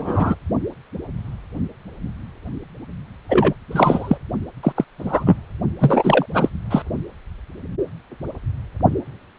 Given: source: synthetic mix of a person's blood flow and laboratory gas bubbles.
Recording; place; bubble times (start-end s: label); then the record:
Doppler ultrasound of blood flow; precordium
0.00-0.35 s: bubbles
3.29-3.54 s: bubbles
3.71-4.18 s: bubbles
4.63-4.72 s: bubbles
4.75-4.84 s: bubbles
4.99-5.36 s: bubbles
5.80-6.26 s: bubbles
6.33-6.48 s: bubbles
6.70-6.82 s: bubbles
From the record:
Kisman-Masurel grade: 223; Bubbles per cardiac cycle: several, 3 to 8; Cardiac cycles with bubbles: 10 to 50%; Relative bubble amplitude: loud (0.450 to 0.775); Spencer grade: 2 (many but less than half of the cardiac periods contain bubble signals, singularly or in groups); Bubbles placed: only in the low amplitude regions of the cardiac cycle